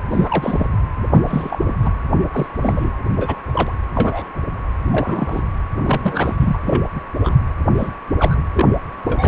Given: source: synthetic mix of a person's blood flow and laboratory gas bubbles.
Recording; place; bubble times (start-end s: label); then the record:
Doppler ultrasound of blood flow; precordium
0.10-0.67 s: bubbles
1.12-1.59 s: bubbles
1.67-1.73 s: bubbles
1.82-1.91 s: bubbles
2.31-2.46 s: bubbles
2.62-2.90 s: bubbles
3.17-3.36 s: bubbles
3.51-3.72 s: bubbles
3.95-4.25 s: bubbles
4.91-5.42 s: bubbles
5.85-6.37 s: bubbles
6.39-6.58 s: bubbles
6.65-6.82 s: bubbles
6.95-7.00 s: bubbles
7.24-7.34 s: bubbles
7.75-7.92 s: bubbles
8.18-8.41 s: bubbles
8.53-8.66 s: bubbles
9.05-9.28 s: bubbles
From the record:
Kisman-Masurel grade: 242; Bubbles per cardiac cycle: several, 3 to 8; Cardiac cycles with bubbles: 100%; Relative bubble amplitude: moderate (0.250 to 0.450); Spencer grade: 3 (all of the cardiac periods contain showers or single bubble signals, but not dominating or overriding the cardiac motion signals); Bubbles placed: anywhere in the cardiac cycle